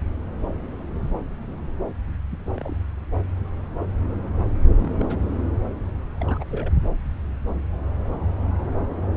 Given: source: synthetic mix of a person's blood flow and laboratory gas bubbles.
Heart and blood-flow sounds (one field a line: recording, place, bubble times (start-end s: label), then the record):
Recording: Doppler ultrasound of blood flow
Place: subclavian vein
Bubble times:
2.31-2.50 s: bubbles
2.56-2.76 s: bubbles
4.75-5.17 s: bubbles
6.20-6.45 s: bubbles
6.51-6.75 s: bubbles
From the record:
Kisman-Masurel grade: 221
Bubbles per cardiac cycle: several, 3 to 8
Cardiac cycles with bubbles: 10 to 50%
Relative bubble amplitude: barely perceptible (0.100 to 0.250)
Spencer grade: 2 (many but less than half of the cardiac periods contain bubble signals, singularly or in groups)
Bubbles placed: anywhere in the cardiac cycle